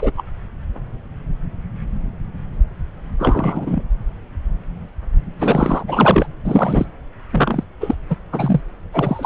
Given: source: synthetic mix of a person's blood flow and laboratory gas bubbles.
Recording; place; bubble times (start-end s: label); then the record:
Doppler ultrasound of blood flow; subclavian vein
0.00-0.12 s: bubbles
0.17-0.24 s: bubbles
3.19-3.83 s: bubbles
5.39-5.83 s: bubbles
5.87-6.28 s: bubbles
6.45-6.86 s: bubbles
7.32-7.63 s: bubbles
7.80-7.96 s: bubbles
8.10-8.17 s: bubbles
8.31-8.61 s: bubbles
8.93-9.26 s: bubbles
From the record:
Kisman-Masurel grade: 233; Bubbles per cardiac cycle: several, 3 to 8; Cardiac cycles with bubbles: 50 to 99%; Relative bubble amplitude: loud (0.450 to 0.775); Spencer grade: 3 (all of the cardiac periods contain showers or single bubble signals, but not dominating or overriding the cardiac motion signals); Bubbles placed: anywhere in the cardiac cycle